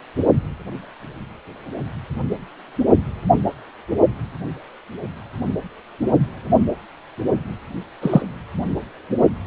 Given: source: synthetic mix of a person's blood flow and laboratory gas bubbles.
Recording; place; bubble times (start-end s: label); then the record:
Doppler ultrasound of blood flow; precordium
8.02-8.22 s: bubbles
From the record:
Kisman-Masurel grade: 113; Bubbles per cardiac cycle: 1 to 2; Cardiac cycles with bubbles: 1 to 10%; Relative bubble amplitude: loud (0.450 to 0.775); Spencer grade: 1 (occasional bubble signal discernible with the cardiac motion signal, with majority of cardiac periods free of bubbles); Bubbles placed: only in the low amplitude regions of the cardiac cycle